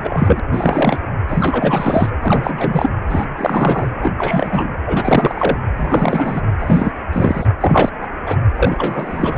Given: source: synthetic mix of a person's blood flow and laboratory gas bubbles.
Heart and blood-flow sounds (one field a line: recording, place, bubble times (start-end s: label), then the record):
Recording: Doppler ultrasound of blood flow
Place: precordium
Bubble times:
0.00-0.40 s: bubbles
0.52-0.98 s: bubbles
1.29-2.09 s: bubbles
2.21-2.91 s: bubbles
3.09-3.25 s: bubbles
3.37-3.89 s: bubbles
4.02-4.13 s: bubbles
4.18-4.73 s: bubbles
4.86-5.58 s: bubbles
5.77-6.42 s: bubbles
6.58-6.92 s: bubbles
7.12-7.47 s: bubbles
7.60-7.89 s: bubbles
8.01-8.07 s: bubbles
8.26-8.37 s: bubbles
8.55-9.38 s: bubbles
From the record:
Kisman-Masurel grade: 343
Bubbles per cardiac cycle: rolling drumbeat, 9 or more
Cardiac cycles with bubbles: 100%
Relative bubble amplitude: loud (0.450 to 0.775)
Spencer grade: 3 (all of the cardiac periods contain showers or single bubble signals, but not dominating or overriding the cardiac motion signals)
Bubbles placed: anywhere in the cardiac cycle